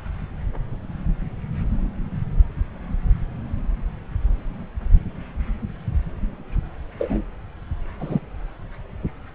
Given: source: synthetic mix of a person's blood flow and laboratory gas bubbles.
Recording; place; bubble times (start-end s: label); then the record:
Doppler ultrasound of blood flow; subclavian vein
6.99-7.24 s: bubbles
7.99-8.20 s: bubbles
From the record:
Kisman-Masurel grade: 112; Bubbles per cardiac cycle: 1 to 2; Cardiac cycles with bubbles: 1 to 10%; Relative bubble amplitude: moderate (0.250 to 0.450); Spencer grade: 1 (occasional bubble signal discernible with the cardiac motion signal, with majority of cardiac periods free of bubbles); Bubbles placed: anywhere in the cardiac cycle